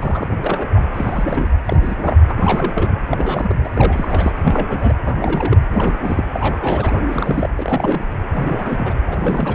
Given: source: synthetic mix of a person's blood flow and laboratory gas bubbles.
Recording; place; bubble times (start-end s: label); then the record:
Doppler ultrasound of blood flow; precordium
0.00-0.27 s: bubbles
0.44-0.68 s: bubbles
0.75-0.80 s: bubbles
0.94-1.58 s: bubbles
1.65-1.77 s: bubbles
1.81-1.96 s: bubbles
1.98-2.19 s: bubbles
2.27-2.91 s: bubbles
3.09-3.56 s: bubbles
3.62-3.69 s: bubbles
3.75-4.33 s: bubbles
4.46-4.94 s: bubbles
5.03-5.60 s: bubbles
5.71-6.24 s: bubbles
6.33-6.91 s: bubbles
7.09-7.50 s: bubbles
7.56-8.06 s: bubbles
8.34-8.93 s: bubbles
9.07-9.55 s: bubbles
From the record:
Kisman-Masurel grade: 342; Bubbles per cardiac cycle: rolling drumbeat, 9 or more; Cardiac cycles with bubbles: 100%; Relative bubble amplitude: moderate (0.250 to 0.450); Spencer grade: 3 (all of the cardiac periods contain showers or single bubble signals, but not dominating or overriding the cardiac motion signals); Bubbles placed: anywhere in the cardiac cycle